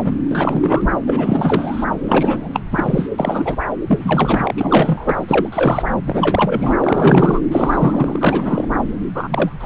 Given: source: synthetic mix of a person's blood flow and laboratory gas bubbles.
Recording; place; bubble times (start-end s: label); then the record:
Doppler ultrasound of blood flow; subclavian vein
0.04-0.14 s: bubbles
0.31-0.90 s: bubbles
1.06-1.85 s: bubbles
2.06-2.48 s: bubbles
2.54-2.60 s: bubbles
2.71-3.09 s: bubbles
3.18-3.59 s: bubbles
3.87-4.54 s: bubbles
4.57-5.48 s: bubbles
5.52-5.96 s: bubbles
6.07-6.75 s: bubbles
6.81-7.41 s: bubbles
7.51-8.81 s: bubbles
9.15-9.66 s: bubbles
From the record:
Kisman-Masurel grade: 343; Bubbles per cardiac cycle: rolling drumbeat, 9 or more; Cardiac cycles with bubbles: 100%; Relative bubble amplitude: loud (0.450 to 0.775); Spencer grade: 3 (all of the cardiac periods contain showers or single bubble signals, but not dominating or overriding the cardiac motion signals); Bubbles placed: anywhere in the cardiac cycle